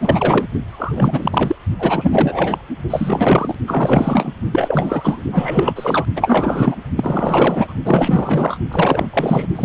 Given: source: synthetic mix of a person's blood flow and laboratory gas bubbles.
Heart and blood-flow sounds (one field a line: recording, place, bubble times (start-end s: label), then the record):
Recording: Doppler ultrasound of blood flow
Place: precordium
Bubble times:
0.00-0.47 s: bubbles
0.70-1.56 s: bubbles
1.79-2.62 s: bubbles
2.90-3.55 s: bubbles
3.67-4.32 s: bubbles
4.51-5.23 s: bubbles
5.32-6.06 s: bubbles
6.16-6.75 s: bubbles
6.96-7.74 s: bubbles
7.85-8.58 s: bubbles
8.71-9.09 s: bubbles
9.13-9.47 s: bubbles
9.55-9.65 s: bubbles
From the record:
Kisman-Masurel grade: 444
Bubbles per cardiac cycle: continuous sound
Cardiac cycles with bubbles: 100%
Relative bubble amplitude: maximal (0.775 to 0.999)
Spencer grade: 4 (maximum detectable bubble signal sounding continuously throughout systole and diastole of every cardiac period, and overriding the amplitude of the normal cardiac signals)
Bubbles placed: only in the low amplitude regions of the cardiac cycle